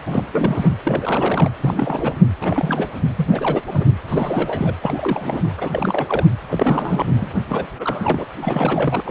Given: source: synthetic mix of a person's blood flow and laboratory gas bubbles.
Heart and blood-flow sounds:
Doppler ultrasound of blood flow; precordium
0.06-0.23 s: bubbles
0.32-0.77 s: bubbles
0.83-1.51 s: bubbles
1.61-2.15 s: bubbles
2.41-2.90 s: bubbles
3.16-3.26 s: bubbles
3.31-3.61 s: bubbles
3.67-3.85 s: bubbles
4.08-4.74 s: bubbles
4.83-5.53 s: bubbles
5.58-6.27 s: bubbles
6.50-7.28 s: bubbles
7.49-7.66 s: bubbles
7.78-8.25 s: bubbles
8.42-9.02 s: bubbles
9.05-9.11 s: bubbles
From the record:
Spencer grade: 3 (all of the cardiac periods contain showers or single bubble signals, but not dominating or overriding the cardiac motion signals); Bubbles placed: anywhere in the cardiac cycle

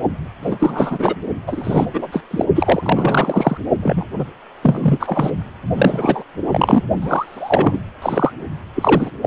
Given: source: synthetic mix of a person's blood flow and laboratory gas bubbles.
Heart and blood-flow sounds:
Doppler ultrasound of blood flow; precordium
0.42-1.16 s: bubbles
1.47-1.86 s: bubbles
1.93-2.24 s: bubbles
2.30-2.45 s: bubbles
2.55-3.58 s: bubbles
3.83-4.05 s: bubbles
4.18-4.25 s: bubbles
4.62-5.30 s: bubbles
5.75-6.23 s: bubbles
6.49-6.83 s: bubbles
7.01-7.80 s: bubbles
8.02-8.32 s: bubbles
8.74-9.11 s: bubbles
9.22-9.27 s: bubbles
From the record:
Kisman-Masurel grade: 343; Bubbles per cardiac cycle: rolling drumbeat, 9 or more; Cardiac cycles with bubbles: 100%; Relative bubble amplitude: loud (0.450 to 0.775); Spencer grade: 3 (all of the cardiac periods contain showers or single bubble signals, but not dominating or overriding the cardiac motion signals); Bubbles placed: only in the low amplitude regions of the cardiac cycle

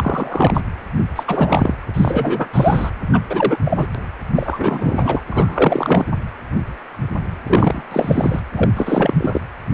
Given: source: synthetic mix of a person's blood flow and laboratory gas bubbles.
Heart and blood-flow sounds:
Doppler ultrasound of blood flow; precordium
0.00-0.61 s: bubbles
1.15-1.24 s: bubbles
1.27-1.75 s: bubbles
1.94-2.48 s: bubbles
2.54-2.90 s: bubbles
3.12-3.21 s: bubbles
3.29-3.58 s: bubbles
3.65-3.87 s: bubbles
4.34-5.21 s: bubbles
5.30-6.04 s: bubbles
7.47-7.82 s: bubbles
7.90-8.40 s: bubbles
8.55-8.70 s: bubbles
8.76-9.13 s: bubbles
9.17-9.41 s: bubbles
From the record:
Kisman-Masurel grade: 333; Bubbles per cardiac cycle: rolling drumbeat, 9 or more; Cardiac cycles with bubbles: 50 to 99%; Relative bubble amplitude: loud (0.450 to 0.775); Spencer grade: 3 (all of the cardiac periods contain showers or single bubble signals, but not dominating or overriding the cardiac motion signals); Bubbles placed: anywhere in the cardiac cycle

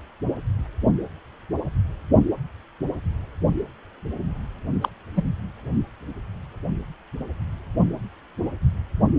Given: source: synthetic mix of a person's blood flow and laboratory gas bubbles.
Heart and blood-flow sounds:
Doppler ultrasound of blood flow; precordium
4.81-4.89 s: bubbles
5.16-5.24 s: bubbles
From the record:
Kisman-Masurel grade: 112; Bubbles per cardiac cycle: 1 to 2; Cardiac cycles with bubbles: 1 to 10%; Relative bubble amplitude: moderate (0.250 to 0.450); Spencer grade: 1 (occasional bubble signal discernible with the cardiac motion signal, with majority of cardiac periods free of bubbles); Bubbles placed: only in the low amplitude regions of the cardiac cycle

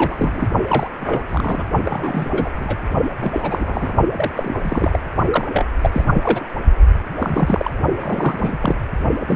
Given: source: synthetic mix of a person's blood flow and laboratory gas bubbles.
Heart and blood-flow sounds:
Doppler ultrasound of blood flow; precordium
0.00-0.50 s: bubbles
0.68-0.90 s: bubbles
0.99-1.24 s: bubbles
1.27-1.66 s: bubbles
1.84-2.49 s: bubbles
2.56-2.79 s: bubbles
3.21-3.92 s: bubbles
4.16-4.54 s: bubbles
4.64-5.00 s: bubbles
5.30-5.47 s: bubbles
5.53-5.66 s: bubbles
5.81-6.05 s: bubbles
6.14-6.45 s: bubbles
7.20-7.71 s: bubbles
8.00-8.58 s: bubbles
8.62-8.76 s: bubbles
9.20-9.36 s: bubbles
From the record:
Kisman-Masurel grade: 342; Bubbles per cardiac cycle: rolling drumbeat, 9 or more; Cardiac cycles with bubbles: 100%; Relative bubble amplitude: moderate (0.250 to 0.450); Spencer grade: 3 (all of the cardiac periods contain showers or single bubble signals, but not dominating or overriding the cardiac motion signals); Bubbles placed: only in the low amplitude regions of the cardiac cycle

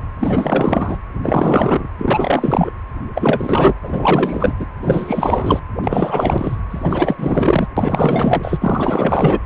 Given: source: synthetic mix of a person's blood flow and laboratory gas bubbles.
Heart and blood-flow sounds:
Doppler ultrasound of blood flow; precordium
0.19-0.99 s: bubbles
1.23-1.88 s: bubbles
1.98-2.71 s: bubbles
3.15-3.74 s: bubbles
3.82-4.54 s: bubbles
4.59-4.66 s: bubbles
4.81-5.59 s: bubbles
5.82-6.56 s: bubbles
6.70-7.67 s: bubbles
7.76-8.58 s: bubbles
8.61-9.39 s: bubbles
From the record:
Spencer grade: 4 (maximum detectable bubble signal sounding continuously throughout systole and diastole of every cardiac period, and overriding the amplitude of the normal cardiac signals); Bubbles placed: anywhere in the cardiac cycle

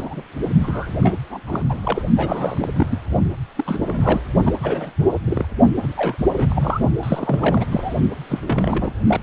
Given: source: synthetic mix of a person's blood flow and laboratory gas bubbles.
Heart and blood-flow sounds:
Doppler ultrasound of blood flow; precordium
0.00-0.22 s: bubbles
0.63-0.88 s: bubbles
1.02-1.19 s: bubbles
1.30-1.40 s: bubbles
1.46-1.62 s: bubbles
1.69-1.79 s: bubbles
1.83-2.02 s: bubbles
2.17-2.69 s: bubbles
2.75-2.98 s: bubbles
3.55-4.21 s: bubbles
4.43-4.54 s: bubbles
4.62-4.92 s: bubbles
5.10-5.20 s: bubbles
5.25-5.46 s: bubbles
5.82-6.17 s: bubbles
6.37-6.81 s: bubbles
7.03-7.65 s: bubbles
7.71-7.93 s: bubbles
8.29-8.94 s: bubbles
9.07-9.21 s: bubbles
From the record:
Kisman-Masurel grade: 332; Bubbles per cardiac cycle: rolling drumbeat, 9 or more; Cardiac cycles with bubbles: 50 to 99%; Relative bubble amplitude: moderate (0.250 to 0.450); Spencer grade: 3 (all of the cardiac periods contain showers or single bubble signals, but not dominating or overriding the cardiac motion signals); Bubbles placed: only in the low amplitude regions of the cardiac cycle

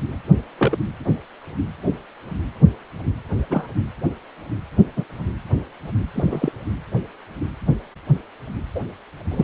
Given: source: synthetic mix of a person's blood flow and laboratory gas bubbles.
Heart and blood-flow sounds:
Doppler ultrasound of blood flow; precordium
0.58-0.77 s: bubbles
3.50-3.67 s: bubbles
4.96-5.04 s: bubbles
6.14-6.52 s: bubbles
8.75-8.79 s: bubbles
9.31-9.44 s: bubbles
From the record:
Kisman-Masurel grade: 122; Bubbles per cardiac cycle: 1 to 2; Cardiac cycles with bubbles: 10 to 50%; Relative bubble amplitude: moderate (0.250 to 0.450); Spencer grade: 2 (many but less than half of the cardiac periods contain bubble signals, singularly or in groups); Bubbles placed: anywhere in the cardiac cycle

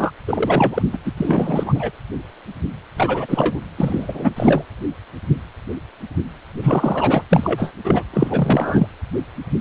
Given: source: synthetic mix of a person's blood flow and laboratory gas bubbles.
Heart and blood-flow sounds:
Doppler ultrasound of blood flow; precordium
0.00-0.11 s: bubbles
0.28-0.82 s: bubbles
0.92-0.97 s: bubbles
1.05-1.11 s: bubbles
1.16-1.90 s: bubbles
2.96-3.59 s: bubbles
3.77-4.32 s: bubbles
4.36-4.64 s: bubbles
6.62-7.23 s: bubbles
7.30-7.72 s: bubbles
7.84-8.04 s: bubbles
8.13-8.87 s: bubbles
From the record:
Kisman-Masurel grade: 333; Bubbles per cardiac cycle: rolling drumbeat, 9 or more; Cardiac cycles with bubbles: 50 to 99%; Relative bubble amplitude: loud (0.450 to 0.775); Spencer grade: 3 (all of the cardiac periods contain showers or single bubble signals, but not dominating or overriding the cardiac motion signals); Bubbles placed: anywhere in the cardiac cycle

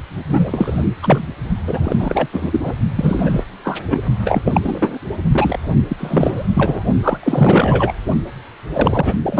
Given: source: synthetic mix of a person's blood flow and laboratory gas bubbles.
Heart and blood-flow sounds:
Doppler ultrasound of blood flow; precordium
0.28-0.85 s: bubbles
1.02-1.27 s: bubbles
1.67-2.29 s: bubbles
2.32-2.60 s: bubbles
2.63-2.73 s: bubbles
2.96-3.44 s: bubbles
3.63-3.80 s: bubbles
3.90-4.01 s: bubbles
4.25-4.99 s: bubbles
5.32-5.59 s: bubbles
5.66-5.75 s: bubbles
5.88-6.46 s: bubbles
6.54-6.83 s: bubbles
7.03-7.17 s: bubbles
7.23-7.93 s: bubbles
8.72-9.14 s: bubbles
9.22-9.39 s: bubbles
From the record:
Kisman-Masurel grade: 343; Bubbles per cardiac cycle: rolling drumbeat, 9 or more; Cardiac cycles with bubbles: 100%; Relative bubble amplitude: loud (0.450 to 0.775); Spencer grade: 3 (all of the cardiac periods contain showers or single bubble signals, but not dominating or overriding the cardiac motion signals); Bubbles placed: only in the low amplitude regions of the cardiac cycle

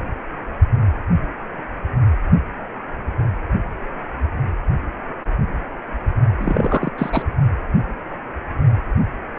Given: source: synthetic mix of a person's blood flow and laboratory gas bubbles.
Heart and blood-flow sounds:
Doppler ultrasound of blood flow; precordium
6.40-6.91 s: bubbles
6.98-7.22 s: bubbles
From the record:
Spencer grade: 1 (occasional bubble signal discernible with the cardiac motion signal, with majority of cardiac periods free of bubbles); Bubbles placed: only in the low amplitude regions of the cardiac cycle

